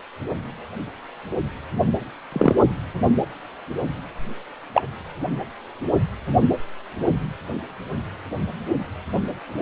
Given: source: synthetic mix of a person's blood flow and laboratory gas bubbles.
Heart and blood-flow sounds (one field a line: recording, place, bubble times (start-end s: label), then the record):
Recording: Doppler ultrasound of blood flow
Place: precordium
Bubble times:
2.32-2.55 s: bubbles
4.74-4.83 s: bubbles
From the record:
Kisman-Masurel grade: 123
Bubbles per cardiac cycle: 1 to 2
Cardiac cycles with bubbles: 10 to 50%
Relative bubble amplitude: loud (0.450 to 0.775)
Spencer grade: 2 (many but less than half of the cardiac periods contain bubble signals, singularly or in groups)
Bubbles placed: only in the low amplitude regions of the cardiac cycle